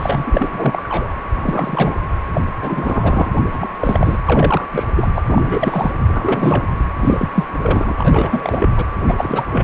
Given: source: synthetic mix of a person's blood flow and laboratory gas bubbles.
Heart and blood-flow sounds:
Doppler ultrasound of blood flow; precordium
0.00-1.08 s: bubbles
1.33-1.99 s: bubbles
2.34-2.42 s: bubbles
2.62-3.29 s: bubbles
3.35-3.41 s: bubbles
3.52-3.68 s: bubbles
3.80-4.18 s: bubbles
4.25-4.67 s: bubbles
4.73-4.84 s: bubbles
4.96-5.11 s: bubbles
5.15-5.23 s: bubbles
5.27-5.91 s: bubbles
6.08-6.67 s: bubbles
6.75-6.83 s: bubbles
7.00-7.29 s: bubbles
7.35-7.46 s: bubbles
7.61-7.94 s: bubbles
7.98-8.69 s: bubbles
8.76-8.85 s: bubbles
9.07-9.15 s: bubbles
9.18-9.44 s: bubbles
9.51-9.64 s: bubbles
From the record:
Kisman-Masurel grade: 343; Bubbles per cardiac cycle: rolling drumbeat, 9 or more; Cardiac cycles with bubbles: 100%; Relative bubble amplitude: loud (0.450 to 0.775); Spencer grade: 3 (all of the cardiac periods contain showers or single bubble signals, but not dominating or overriding the cardiac motion signals); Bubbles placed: anywhere in the cardiac cycle

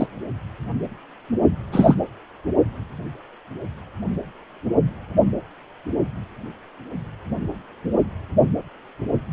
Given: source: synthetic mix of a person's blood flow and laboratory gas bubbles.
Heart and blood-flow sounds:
Doppler ultrasound of blood flow; precordium
0.00-0.06 s: bubbles
1.72-1.95 s: bubbles
From the record:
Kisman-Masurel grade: 123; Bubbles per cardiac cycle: 1 to 2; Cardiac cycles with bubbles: 10 to 50%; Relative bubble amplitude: loud (0.450 to 0.775); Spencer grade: 2 (many but less than half of the cardiac periods contain bubble signals, singularly or in groups); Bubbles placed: only in the low amplitude regions of the cardiac cycle

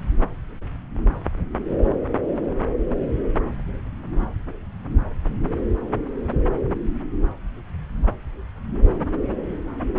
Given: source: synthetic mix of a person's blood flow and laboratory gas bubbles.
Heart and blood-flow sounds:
Doppler ultrasound of blood flow; subclavian vein
no bubbles
From the record:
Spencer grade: 0 (complete lack of bubble signals)

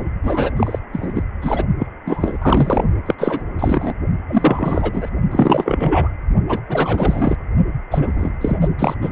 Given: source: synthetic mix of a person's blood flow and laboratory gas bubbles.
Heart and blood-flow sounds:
Doppler ultrasound of blood flow; precordium
0.00-0.05 s: bubbles
0.23-0.51 s: bubbles
0.56-0.79 s: bubbles
0.93-1.24 s: bubbles
1.41-1.64 s: bubbles
1.78-1.86 s: bubbles
2.06-2.37 s: bubbles
2.42-2.83 s: bubbles
3.06-3.15 s: bubbles
3.18-3.43 s: bubbles
3.58-3.93 s: bubbles
4.28-5.09 s: bubbles
5.31-6.10 s: bubbles
6.47-6.61 s: bubbles
6.69-7.36 s: bubbles
7.91-8.33 s: bubbles
8.41-8.68 s: bubbles
8.79-8.94 s: bubbles
9.01-9.10 s: bubbles
From the record:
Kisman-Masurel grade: 343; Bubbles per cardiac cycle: rolling drumbeat, 9 or more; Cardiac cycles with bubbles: 100%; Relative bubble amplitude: loud (0.450 to 0.775); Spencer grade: 3 (all of the cardiac periods contain showers or single bubble signals, but not dominating or overriding the cardiac motion signals); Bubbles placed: only in the low amplitude regions of the cardiac cycle

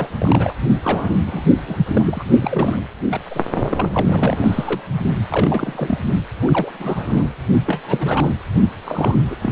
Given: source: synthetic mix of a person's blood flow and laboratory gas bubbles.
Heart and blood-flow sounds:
Doppler ultrasound of blood flow; precordium
0.00-0.08 s: bubbles
0.20-0.55 s: bubbles
0.83-1.16 s: bubbles
1.27-1.48 s: bubbles
1.67-1.75 s: bubbles
1.87-2.24 s: bubbles
2.40-2.83 s: bubbles
3.10-3.20 s: bubbles
3.30-3.42 s: bubbles
3.67-3.88 s: bubbles
3.92-4.80 s: bubbles
5.29-5.99 s: bubbles
6.42-7.28 s: bubbles
7.66-7.80 s: bubbles
7.86-8.33 s: bubbles
8.85-9.16 s: bubbles
9.30-9.36 s: bubbles
9.41-9.52 s: bubbles
From the record:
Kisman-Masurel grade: 332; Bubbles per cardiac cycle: rolling drumbeat, 9 or more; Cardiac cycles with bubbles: 50 to 99%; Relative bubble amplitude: moderate (0.250 to 0.450); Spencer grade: 3 (all of the cardiac periods contain showers or single bubble signals, but not dominating or overriding the cardiac motion signals); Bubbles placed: only in the low amplitude regions of the cardiac cycle

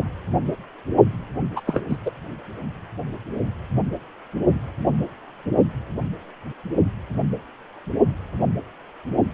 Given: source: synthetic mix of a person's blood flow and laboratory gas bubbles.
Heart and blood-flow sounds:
Doppler ultrasound of blood flow; precordium
1.56-1.60 s: bubbles
1.67-1.81 s: bubbles
1.89-1.96 s: bubbles
2.06-2.10 s: bubbles
From the record:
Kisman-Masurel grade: 213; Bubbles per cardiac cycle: several, 3 to 8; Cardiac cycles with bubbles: 1 to 10%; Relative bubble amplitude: loud (0.450 to 0.775); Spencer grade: 1 (occasional bubble signal discernible with the cardiac motion signal, with majority of cardiac periods free of bubbles); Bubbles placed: anywhere in the cardiac cycle

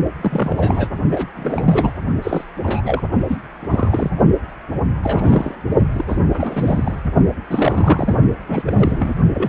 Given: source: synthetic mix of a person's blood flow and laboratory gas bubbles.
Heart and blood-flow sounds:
Doppler ultrasound of blood flow; precordium
0.21-0.89 s: bubbles
1.11-1.28 s: bubbles
1.36-1.93 s: bubbles
2.22-2.44 s: bubbles
2.64-3.02 s: bubbles
3.28-3.38 s: bubbles
3.60-4.12 s: bubbles
5.02-5.55 s: bubbles
5.95-6.04 s: bubbles
6.08-6.19 s: bubbles
6.33-7.00 s: bubbles
7.50-8.18 s: bubbles
8.47-8.63 s: bubbles
8.65-9.15 s: bubbles
9.33-9.49 s: bubbles
From the record:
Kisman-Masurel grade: 342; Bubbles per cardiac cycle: rolling drumbeat, 9 or more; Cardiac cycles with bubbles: 100%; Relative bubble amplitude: moderate (0.250 to 0.450); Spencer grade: 3 (all of the cardiac periods contain showers or single bubble signals, but not dominating or overriding the cardiac motion signals); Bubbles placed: only in the low amplitude regions of the cardiac cycle

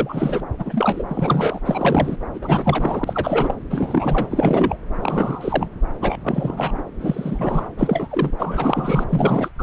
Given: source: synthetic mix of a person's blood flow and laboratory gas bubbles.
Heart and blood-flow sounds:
Doppler ultrasound of blood flow; subclavian vein
0.00-0.43 s: bubbles
0.58-1.03 s: bubbles
1.09-1.59 s: bubbles
1.66-2.17 s: bubbles
2.34-3.54 s: bubbles
3.70-4.29 s: bubbles
4.31-4.76 s: bubbles
4.99-5.70 s: bubbles
6.01-6.19 s: bubbles
6.24-6.84 s: bubbles
7.00-7.68 s: bubbles
7.77-8.07 s: bubbles
8.10-8.32 s: bubbles
8.38-9.05 s: bubbles
9.09-9.50 s: bubbles
9.59-9.63 s: bubbles
From the record:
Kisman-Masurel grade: 342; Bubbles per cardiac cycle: rolling drumbeat, 9 or more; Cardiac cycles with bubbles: 100%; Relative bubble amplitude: moderate (0.250 to 0.450); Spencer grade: 3 (all of the cardiac periods contain showers or single bubble signals, but not dominating or overriding the cardiac motion signals); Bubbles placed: anywhere in the cardiac cycle

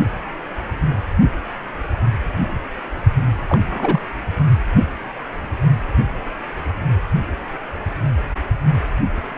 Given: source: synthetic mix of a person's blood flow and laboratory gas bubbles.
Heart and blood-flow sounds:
Doppler ultrasound of blood flow; precordium
3.49-3.60 s: bubbles
3.71-4.00 s: bubbles
From the record:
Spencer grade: 1 (occasional bubble signal discernible with the cardiac motion signal, with majority of cardiac periods free of bubbles); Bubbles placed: only in the low amplitude regions of the cardiac cycle

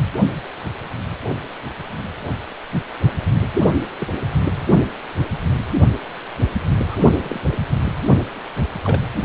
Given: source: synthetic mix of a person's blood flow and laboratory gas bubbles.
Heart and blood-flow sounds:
Doppler ultrasound of blood flow; precordium
3.98-4.08 s: bubbles
6.87-6.96 s: bubbles
7.22-7.41 s: bubbles
8.07-8.15 s: bubbles
8.82-9.02 s: bubbles
From the record:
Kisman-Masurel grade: 121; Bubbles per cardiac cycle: 1 to 2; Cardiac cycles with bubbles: 10 to 50%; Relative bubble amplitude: barely perceptible (0.100 to 0.250); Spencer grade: 2 (many but less than half of the cardiac periods contain bubble signals, singularly or in groups); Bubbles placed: anywhere in the cardiac cycle

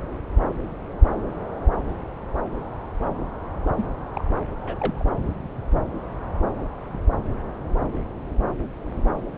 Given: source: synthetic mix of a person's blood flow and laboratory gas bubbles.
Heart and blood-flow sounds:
Doppler ultrasound of blood flow; subclavian vein
3.67-3.85 s: bubbles
4.15-4.24 s: bubbles
4.67-5.04 s: bubbles
From the record:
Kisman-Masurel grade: 221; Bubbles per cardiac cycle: several, 3 to 8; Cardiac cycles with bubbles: 10 to 50%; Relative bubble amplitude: barely perceptible (0.100 to 0.250); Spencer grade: 2 (many but less than half of the cardiac periods contain bubble signals, singularly or in groups); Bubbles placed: anywhere in the cardiac cycle

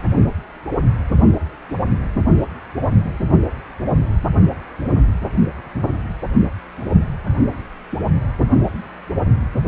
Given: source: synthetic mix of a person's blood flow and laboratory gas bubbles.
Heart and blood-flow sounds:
Doppler ultrasound of blood flow; precordium
no bubbles
From the record:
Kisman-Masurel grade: 000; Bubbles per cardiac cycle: 0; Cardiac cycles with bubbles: 0%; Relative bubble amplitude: no bubbles discernible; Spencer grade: 0 (complete lack of bubble signals)

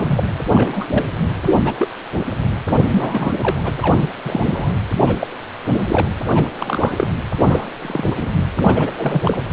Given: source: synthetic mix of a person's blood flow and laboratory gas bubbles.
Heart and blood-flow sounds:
Doppler ultrasound of blood flow; precordium
0.00-0.24 s: bubbles
0.52-0.86 s: bubbles
0.90-1.05 s: bubbles
1.46-1.58 s: bubbles
1.64-1.73 s: bubbles
1.79-1.88 s: bubbles
2.90-3.33 s: bubbles
3.40-3.72 s: bubbles
3.81-3.98 s: bubbles
4.01-4.08 s: bubbles
4.25-4.73 s: bubbles
5.07-5.16 s: bubbles
5.19-5.27 s: bubbles
5.70-6.08 s: bubbles
6.34-6.48 s: bubbles
6.55-7.07 s: bubbles
7.45-7.68 s: bubbles
7.82-8.32 s: bubbles
8.57-8.93 s: bubbles
8.96-9.21 s: bubbles
9.24-9.43 s: bubbles
From the record:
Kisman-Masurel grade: 242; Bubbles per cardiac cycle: several, 3 to 8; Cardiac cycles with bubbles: 100%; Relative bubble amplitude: moderate (0.250 to 0.450); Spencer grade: 3 (all of the cardiac periods contain showers or single bubble signals, but not dominating or overriding the cardiac motion signals); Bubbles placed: anywhere in the cardiac cycle

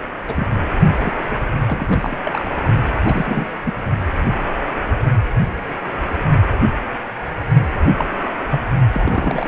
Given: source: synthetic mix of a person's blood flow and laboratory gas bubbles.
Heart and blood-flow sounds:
Doppler ultrasound of blood flow; precordium
0.27-0.48 s: bubbles
1.02-1.13 s: bubbles
1.27-1.46 s: bubbles
1.65-2.17 s: bubbles
2.25-2.48 s: bubbles
3.05-3.48 s: bubbles
3.65-3.74 s: bubbles
7.99-8.05 s: bubbles
8.50-8.61 s: bubbles
8.93-9.48 s: bubbles
From the record:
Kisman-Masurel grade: 232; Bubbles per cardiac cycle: several, 3 to 8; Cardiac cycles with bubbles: 50 to 99%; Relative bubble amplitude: moderate (0.250 to 0.450); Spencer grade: 3 (all of the cardiac periods contain showers or single bubble signals, but not dominating or overriding the cardiac motion signals); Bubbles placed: only in the low amplitude regions of the cardiac cycle

